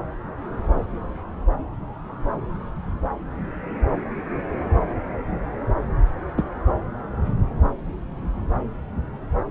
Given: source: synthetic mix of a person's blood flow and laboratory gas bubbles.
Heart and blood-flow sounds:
Doppler ultrasound of blood flow; subclavian vein
6.37-6.42 s: bubbles
From the record:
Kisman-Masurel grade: 113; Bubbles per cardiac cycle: 1 to 2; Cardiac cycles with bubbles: 1 to 10%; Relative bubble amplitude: loud (0.450 to 0.775); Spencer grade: 1 (occasional bubble signal discernible with the cardiac motion signal, with majority of cardiac periods free of bubbles); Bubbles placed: anywhere in the cardiac cycle

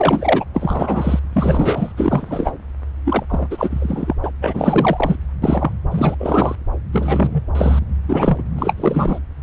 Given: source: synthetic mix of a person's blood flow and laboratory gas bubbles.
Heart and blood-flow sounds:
Doppler ultrasound of blood flow; subclavian vein
0.00-0.44 s: bubbles
0.54-1.20 s: bubbles
1.32-1.92 s: bubbles
1.97-2.52 s: bubbles
3.05-3.23 s: bubbles
3.29-4.14 s: bubbles
4.23-4.31 s: bubbles
4.41-5.16 s: bubbles
5.42-5.73 s: bubbles
5.91-6.15 s: bubbles
6.19-6.56 s: bubbles
6.92-7.42 s: bubbles
7.55-7.79 s: bubbles
8.08-8.43 s: bubbles
8.55-8.74 s: bubbles
8.77-9.19 s: bubbles
From the record:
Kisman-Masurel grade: 343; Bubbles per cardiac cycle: rolling drumbeat, 9 or more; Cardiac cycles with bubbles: 100%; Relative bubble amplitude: loud (0.450 to 0.775); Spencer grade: 3 (all of the cardiac periods contain showers or single bubble signals, but not dominating or overriding the cardiac motion signals); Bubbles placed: anywhere in the cardiac cycle

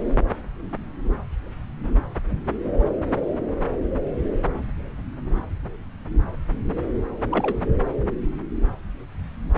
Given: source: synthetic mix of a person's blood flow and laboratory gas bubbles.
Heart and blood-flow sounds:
Doppler ultrasound of blood flow; subclavian vein
7.31-7.57 s: bubbles
From the record:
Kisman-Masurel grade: 112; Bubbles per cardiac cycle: 1 to 2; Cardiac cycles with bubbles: 1 to 10%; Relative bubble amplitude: moderate (0.250 to 0.450); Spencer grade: 1 (occasional bubble signal discernible with the cardiac motion signal, with majority of cardiac periods free of bubbles); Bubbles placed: anywhere in the cardiac cycle

